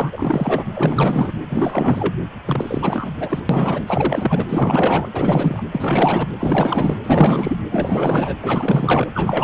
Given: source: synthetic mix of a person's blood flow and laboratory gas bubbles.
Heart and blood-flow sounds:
Doppler ultrasound of blood flow; precordium
0.00-0.64 s: bubbles
0.73-1.32 s: bubbles
1.49-2.15 s: bubbles
2.45-3.10 s: bubbles
3.19-3.40 s: bubbles
3.49-3.85 s: bubbles
3.87-5.08 s: bubbles
5.11-5.63 s: bubbles
5.72-6.29 s: bubbles
6.39-6.96 s: bubbles
7.03-7.56 s: bubbles
7.71-8.34 s: bubbles
8.40-9.10 s: bubbles
9.14-9.44 s: bubbles
From the record:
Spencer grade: 4 (maximum detectable bubble signal sounding continuously throughout systole and diastole of every cardiac period, and overriding the amplitude of the normal cardiac signals); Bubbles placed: anywhere in the cardiac cycle

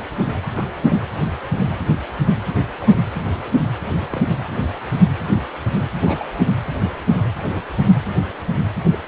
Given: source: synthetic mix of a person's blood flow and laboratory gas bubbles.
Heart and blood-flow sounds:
Doppler ultrasound of blood flow; precordium
0.55-0.65 s: bubbles
0.89-1.04 s: bubbles
2.80-2.97 s: bubbles
4.10-4.33 s: bubbles
5.35-5.43 s: bubbles
6.02-6.27 s: bubbles
8.91-9.00 s: bubbles
From the record:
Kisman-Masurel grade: 121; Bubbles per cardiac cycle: 1 to 2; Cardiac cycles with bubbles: 10 to 50%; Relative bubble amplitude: barely perceptible (0.100 to 0.250); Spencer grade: 2 (many but less than half of the cardiac periods contain bubble signals, singularly or in groups); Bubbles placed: anywhere in the cardiac cycle

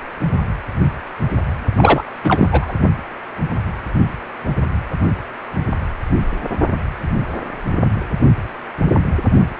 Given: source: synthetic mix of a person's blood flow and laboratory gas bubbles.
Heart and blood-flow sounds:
Doppler ultrasound of blood flow; precordium
1.76-2.04 s: bubbles
2.24-2.48 s: bubbles
2.52-2.73 s: bubbles
From the record:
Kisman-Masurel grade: 213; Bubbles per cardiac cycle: several, 3 to 8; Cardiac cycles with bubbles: 1 to 10%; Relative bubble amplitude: loud (0.450 to 0.775); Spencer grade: 1 (occasional bubble signal discernible with the cardiac motion signal, with majority of cardiac periods free of bubbles); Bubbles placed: only in the low amplitude regions of the cardiac cycle

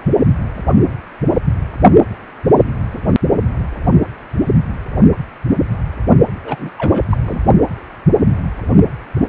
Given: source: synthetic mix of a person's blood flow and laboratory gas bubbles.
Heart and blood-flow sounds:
Doppler ultrasound of blood flow; precordium
6.44-6.69 s: bubbles
6.78-7.04 s: bubbles
7.09-7.17 s: bubbles
7.25-7.42 s: bubbles
From the record:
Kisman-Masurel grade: 222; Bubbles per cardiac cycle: several, 3 to 8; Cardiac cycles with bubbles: 10 to 50%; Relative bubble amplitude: moderate (0.250 to 0.450); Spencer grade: 2 (many but less than half of the cardiac periods contain bubble signals, singularly or in groups); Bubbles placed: only in the low amplitude regions of the cardiac cycle

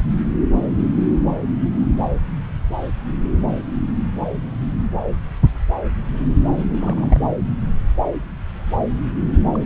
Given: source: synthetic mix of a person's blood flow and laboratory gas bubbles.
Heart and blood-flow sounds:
Doppler ultrasound of blood flow; subclavian vein
6.57-6.65 s: bubbles
6.68-7.18 s: bubbles
9.54-9.64 s: bubbles
From the record:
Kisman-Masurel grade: 221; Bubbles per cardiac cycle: several, 3 to 8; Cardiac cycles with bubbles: 10 to 50%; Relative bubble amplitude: barely perceptible (0.100 to 0.250); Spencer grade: 2 (many but less than half of the cardiac periods contain bubble signals, singularly or in groups); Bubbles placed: anywhere in the cardiac cycle

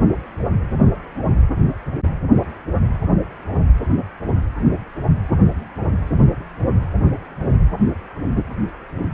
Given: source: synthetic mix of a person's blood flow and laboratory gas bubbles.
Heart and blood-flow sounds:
Doppler ultrasound of blood flow; precordium
no bubbles
From the record:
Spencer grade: 0 (complete lack of bubble signals)

